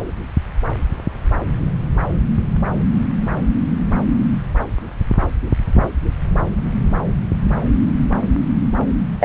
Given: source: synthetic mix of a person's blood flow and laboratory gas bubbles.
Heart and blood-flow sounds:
Doppler ultrasound of blood flow; subclavian vein
9.20-9.25 s: bubbles
From the record:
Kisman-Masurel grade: 213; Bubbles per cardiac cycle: several, 3 to 8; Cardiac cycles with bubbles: 1 to 10%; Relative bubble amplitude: loud (0.450 to 0.775); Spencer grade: 1 (occasional bubble signal discernible with the cardiac motion signal, with majority of cardiac periods free of bubbles); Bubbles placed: anywhere in the cardiac cycle

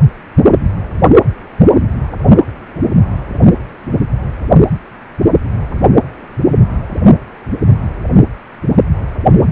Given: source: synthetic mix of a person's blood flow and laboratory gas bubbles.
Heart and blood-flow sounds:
Doppler ultrasound of blood flow; precordium
9.38-9.50 s: bubbles
From the record:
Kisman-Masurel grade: 112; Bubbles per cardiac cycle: 1 to 2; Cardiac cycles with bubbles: 1 to 10%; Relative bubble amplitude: moderate (0.250 to 0.450); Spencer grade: 1 (occasional bubble signal discernible with the cardiac motion signal, with majority of cardiac periods free of bubbles); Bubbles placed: only in the low amplitude regions of the cardiac cycle

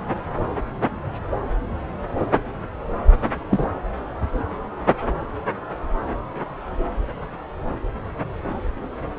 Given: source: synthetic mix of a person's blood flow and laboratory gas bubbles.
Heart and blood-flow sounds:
Doppler ultrasound of blood flow; subclavian vein
3.49-3.68 s: bubbles
From the record:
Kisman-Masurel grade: 112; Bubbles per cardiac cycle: 1 to 2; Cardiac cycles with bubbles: 1 to 10%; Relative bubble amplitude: moderate (0.250 to 0.450); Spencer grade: 1 (occasional bubble signal discernible with the cardiac motion signal, with majority of cardiac periods free of bubbles); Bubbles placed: anywhere in the cardiac cycle

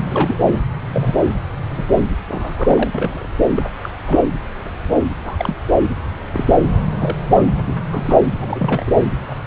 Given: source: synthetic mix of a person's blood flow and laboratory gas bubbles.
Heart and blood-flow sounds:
Doppler ultrasound of blood flow; subclavian vein
0.11-0.35 s: bubbles
0.43-0.62 s: bubbles
0.88-1.21 s: bubbles
1.77-1.84 s: bubbles
1.94-2.03 s: bubbles
2.27-2.91 s: bubbles
2.94-3.27 s: bubbles
3.55-3.62 s: bubbles
3.82-3.89 s: bubbles
4.04-4.18 s: bubbles
5.24-5.56 s: bubbles
6.33-6.54 s: bubbles
6.98-7.16 s: bubbles
7.30-7.42 s: bubbles
7.67-7.74 s: bubbles
7.89-8.19 s: bubbles
8.41-8.91 s: bubbles
9.29-9.35 s: bubbles
From the record:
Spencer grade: 3 (all of the cardiac periods contain showers or single bubble signals, but not dominating or overriding the cardiac motion signals); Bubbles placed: anywhere in the cardiac cycle

